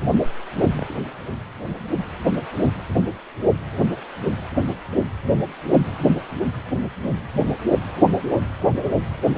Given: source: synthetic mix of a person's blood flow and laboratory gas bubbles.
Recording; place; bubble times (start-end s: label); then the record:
Doppler ultrasound of blood flow; precordium
0.77-0.95 s: bubbles
8.28-8.40 s: bubbles
From the record:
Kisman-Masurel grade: 121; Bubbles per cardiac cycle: 1 to 2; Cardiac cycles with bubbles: 10 to 50%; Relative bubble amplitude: barely perceptible (0.100 to 0.250); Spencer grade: 2 (many but less than half of the cardiac periods contain bubble signals, singularly or in groups); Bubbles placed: anywhere in the cardiac cycle